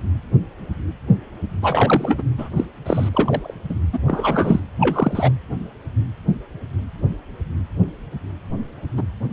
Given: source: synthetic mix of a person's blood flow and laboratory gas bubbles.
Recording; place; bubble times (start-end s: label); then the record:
Doppler ultrasound of blood flow; precordium
1.62-2.22 s: bubbles
2.38-2.49 s: bubbles
2.56-2.65 s: bubbles
2.85-3.55 s: bubbles
3.69-3.75 s: bubbles
3.92-3.99 s: bubbles
4.05-4.60 s: bubbles
4.80-5.32 s: bubbles
8.97-9.02 s: bubbles
From the record:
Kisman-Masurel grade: 232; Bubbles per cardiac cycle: several, 3 to 8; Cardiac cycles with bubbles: 50 to 99%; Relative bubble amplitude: moderate (0.250 to 0.450); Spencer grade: 3 (all of the cardiac periods contain showers or single bubble signals, but not dominating or overriding the cardiac motion signals); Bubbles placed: anywhere in the cardiac cycle